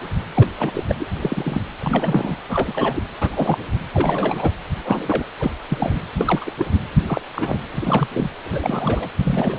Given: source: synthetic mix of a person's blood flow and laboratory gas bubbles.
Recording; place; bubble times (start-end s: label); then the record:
Doppler ultrasound of blood flow; precordium
0.34-0.48 s: bubbles
0.59-0.84 s: bubbles
0.89-0.95 s: bubbles
0.99-1.06 s: bubbles
1.21-1.62 s: bubbles
1.79-2.37 s: bubbles
2.48-3.02 s: bubbles
3.17-3.57 s: bubbles
3.94-4.56 s: bubbles
4.85-5.25 s: bubbles
5.40-5.52 s: bubbles
5.69-5.98 s: bubbles
6.18-6.52 s: bubbles
6.58-6.66 s: bubbles
7.07-7.21 s: bubbles
7.34-7.58 s: bubbles
7.72-8.08 s: bubbles
8.13-8.32 s: bubbles
8.45-9.08 s: bubbles
9.17-9.58 s: bubbles
From the record:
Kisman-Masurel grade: 242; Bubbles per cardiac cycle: several, 3 to 8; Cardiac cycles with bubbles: 100%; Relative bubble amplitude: moderate (0.250 to 0.450); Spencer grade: 3 (all of the cardiac periods contain showers or single bubble signals, but not dominating or overriding the cardiac motion signals); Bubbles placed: anywhere in the cardiac cycle